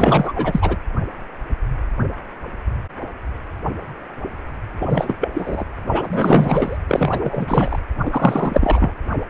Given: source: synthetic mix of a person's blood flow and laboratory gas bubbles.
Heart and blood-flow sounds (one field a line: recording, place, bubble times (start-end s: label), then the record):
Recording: Doppler ultrasound of blood flow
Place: precordium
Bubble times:
0.00-0.77 s: bubbles
4.79-5.17 s: bubbles
5.20-5.29 s: bubbles
5.34-5.64 s: bubbles
5.86-6.78 s: bubbles
6.88-7.79 s: bubbles
8.05-8.94 s: bubbles
From the record:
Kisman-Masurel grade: 333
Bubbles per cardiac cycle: rolling drumbeat, 9 or more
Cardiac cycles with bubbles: 50 to 99%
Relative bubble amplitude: loud (0.450 to 0.775)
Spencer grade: 3 (all of the cardiac periods contain showers or single bubble signals, but not dominating or overriding the cardiac motion signals)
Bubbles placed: anywhere in the cardiac cycle